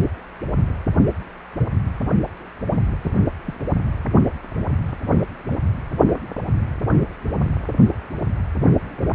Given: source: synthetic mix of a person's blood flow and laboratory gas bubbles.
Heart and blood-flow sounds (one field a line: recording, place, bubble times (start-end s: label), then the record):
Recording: Doppler ultrasound of blood flow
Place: precordium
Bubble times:
3.02-3.25 s: bubbles
3.46-3.54 s: bubbles
From the record:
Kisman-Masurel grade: 111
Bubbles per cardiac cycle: 1 to 2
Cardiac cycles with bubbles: 1 to 10%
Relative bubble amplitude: barely perceptible (0.100 to 0.250)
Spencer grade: 1 (occasional bubble signal discernible with the cardiac motion signal, with majority of cardiac periods free of bubbles)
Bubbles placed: anywhere in the cardiac cycle